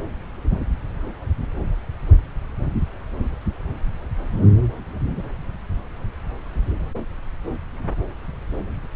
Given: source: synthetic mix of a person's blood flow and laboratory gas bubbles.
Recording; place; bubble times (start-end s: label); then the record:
Doppler ultrasound of blood flow; subclavian vein
no bubbles
From the record:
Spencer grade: 0 (complete lack of bubble signals)